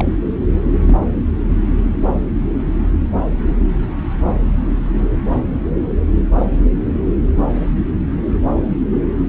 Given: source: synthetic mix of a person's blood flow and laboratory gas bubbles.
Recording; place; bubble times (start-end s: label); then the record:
Doppler ultrasound of blood flow; subclavian vein
0.00-0.09 s: bubbles
0.85-0.98 s: bubbles
From the record:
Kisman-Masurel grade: 212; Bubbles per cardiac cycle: several, 3 to 8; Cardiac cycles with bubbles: 1 to 10%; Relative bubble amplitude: moderate (0.250 to 0.450); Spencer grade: 1 (occasional bubble signal discernible with the cardiac motion signal, with majority of cardiac periods free of bubbles); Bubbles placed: anywhere in the cardiac cycle